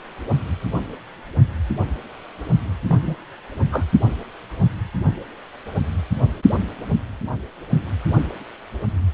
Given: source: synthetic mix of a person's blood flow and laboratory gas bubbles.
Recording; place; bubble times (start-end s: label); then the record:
Doppler ultrasound of blood flow; precordium
2.87-3.17 s: bubbles
3.71-3.83 s: bubbles
From the record:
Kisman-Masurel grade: 122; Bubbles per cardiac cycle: 1 to 2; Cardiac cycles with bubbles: 10 to 50%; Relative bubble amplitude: moderate (0.250 to 0.450); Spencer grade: 2 (many but less than half of the cardiac periods contain bubble signals, singularly or in groups); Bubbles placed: only in the low amplitude regions of the cardiac cycle